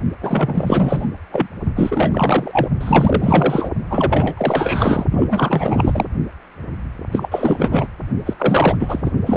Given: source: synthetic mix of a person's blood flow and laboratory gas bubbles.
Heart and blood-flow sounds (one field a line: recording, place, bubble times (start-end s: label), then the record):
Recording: Doppler ultrasound of blood flow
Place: precordium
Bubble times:
0.21-1.07 s: bubbles
1.31-1.47 s: bubbles
1.76-2.69 s: bubbles
2.81-3.69 s: bubbles
3.90-5.05 s: bubbles
5.11-6.05 s: bubbles
7.12-7.87 s: bubbles
8.26-8.34 s: bubbles
8.38-8.77 s: bubbles
8.79-9.11 s: bubbles
9.26-9.37 s: bubbles
From the record:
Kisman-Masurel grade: 444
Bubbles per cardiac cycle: continuous sound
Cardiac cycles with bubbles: 100%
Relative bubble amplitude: maximal (0.775 to 0.999)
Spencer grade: 4 (maximum detectable bubble signal sounding continuously throughout systole and diastole of every cardiac period, and overriding the amplitude of the normal cardiac signals)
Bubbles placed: only in the low amplitude regions of the cardiac cycle